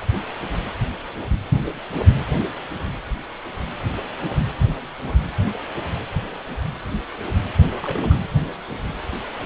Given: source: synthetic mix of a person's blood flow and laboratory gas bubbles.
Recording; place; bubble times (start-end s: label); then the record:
Doppler ultrasound of blood flow; precordium
7.81-8.15 s: bubbles
From the record:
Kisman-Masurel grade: 111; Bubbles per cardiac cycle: 1 to 2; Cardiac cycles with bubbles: 1 to 10%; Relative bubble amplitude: barely perceptible (0.100 to 0.250); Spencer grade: 1 (occasional bubble signal discernible with the cardiac motion signal, with majority of cardiac periods free of bubbles); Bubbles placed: anywhere in the cardiac cycle